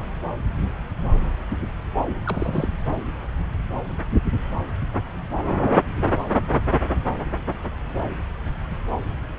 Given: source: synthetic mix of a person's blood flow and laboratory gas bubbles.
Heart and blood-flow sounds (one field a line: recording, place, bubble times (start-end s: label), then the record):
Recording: Doppler ultrasound of blood flow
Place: subclavian vein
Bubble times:
2.26-2.70 s: bubbles
From the record:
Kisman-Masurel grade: 212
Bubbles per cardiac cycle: several, 3 to 8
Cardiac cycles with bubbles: 1 to 10%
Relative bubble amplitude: moderate (0.250 to 0.450)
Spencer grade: 1 (occasional bubble signal discernible with the cardiac motion signal, with majority of cardiac periods free of bubbles)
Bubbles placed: anywhere in the cardiac cycle